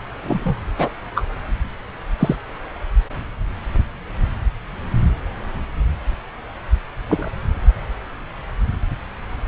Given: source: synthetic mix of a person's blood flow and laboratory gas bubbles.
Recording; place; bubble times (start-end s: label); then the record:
Doppler ultrasound of blood flow; subclavian vein
0.23-0.61 s: bubbles
0.78-0.89 s: bubbles
1.15-1.24 s: bubbles
2.19-2.36 s: bubbles
7.08-7.30 s: bubbles
From the record:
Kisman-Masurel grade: 123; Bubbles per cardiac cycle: 1 to 2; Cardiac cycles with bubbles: 10 to 50%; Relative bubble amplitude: loud (0.450 to 0.775); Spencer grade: 2 (many but less than half of the cardiac periods contain bubble signals, singularly or in groups); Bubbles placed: anywhere in the cardiac cycle